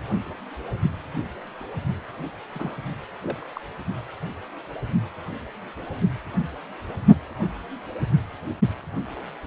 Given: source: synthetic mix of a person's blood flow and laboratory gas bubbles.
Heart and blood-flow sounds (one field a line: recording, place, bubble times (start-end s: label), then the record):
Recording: Doppler ultrasound of blood flow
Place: precordium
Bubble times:
2.52-2.75 s: bubbles
3.21-3.49 s: bubbles
3.56-3.59 s: bubbles
From the record:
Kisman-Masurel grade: 211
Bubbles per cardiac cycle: several, 3 to 8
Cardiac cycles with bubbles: 1 to 10%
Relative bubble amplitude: barely perceptible (0.100 to 0.250)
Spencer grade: 1 (occasional bubble signal discernible with the cardiac motion signal, with majority of cardiac periods free of bubbles)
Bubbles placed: only in the low amplitude regions of the cardiac cycle